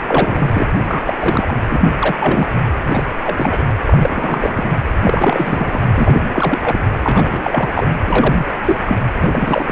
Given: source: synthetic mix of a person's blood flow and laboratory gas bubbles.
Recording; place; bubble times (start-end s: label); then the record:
Doppler ultrasound of blood flow; precordium
0.07-0.65 s: bubbles
0.75-1.57 s: bubbles
1.69-1.94 s: bubbles
1.98-2.18 s: bubbles
2.20-2.52 s: bubbles
2.87-3.04 s: bubbles
3.23-3.62 s: bubbles
3.86-4.72 s: bubbles
5.04-5.81 s: bubbles
5.96-6.26 s: bubbles
6.32-6.59 s: bubbles
6.62-6.79 s: bubbles
6.99-7.69 s: bubbles
7.74-7.87 s: bubbles
8.06-8.45 s: bubbles
8.66-8.83 s: bubbles
8.87-8.96 s: bubbles
9.12-9.72 s: bubbles
From the record:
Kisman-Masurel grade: 342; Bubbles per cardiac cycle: rolling drumbeat, 9 or more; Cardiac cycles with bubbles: 100%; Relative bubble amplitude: moderate (0.250 to 0.450); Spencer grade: 3 (all of the cardiac periods contain showers or single bubble signals, but not dominating or overriding the cardiac motion signals); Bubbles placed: anywhere in the cardiac cycle